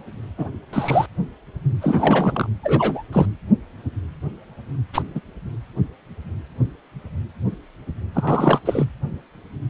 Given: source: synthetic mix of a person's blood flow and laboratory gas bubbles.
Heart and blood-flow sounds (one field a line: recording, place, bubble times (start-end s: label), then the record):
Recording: Doppler ultrasound of blood flow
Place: precordium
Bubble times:
0.38-0.48 s: bubbles
0.72-1.06 s: bubbles
1.81-2.50 s: bubbles
2.63-3.03 s: bubbles
3.12-3.29 s: bubbles
4.93-5.02 s: bubbles
5.15-5.21 s: bubbles
8.14-8.60 s: bubbles
8.65-8.85 s: bubbles
From the record:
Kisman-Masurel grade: 222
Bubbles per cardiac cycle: several, 3 to 8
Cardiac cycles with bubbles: 10 to 50%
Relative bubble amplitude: moderate (0.250 to 0.450)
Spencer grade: 2 (many but less than half of the cardiac periods contain bubble signals, singularly or in groups)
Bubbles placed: anywhere in the cardiac cycle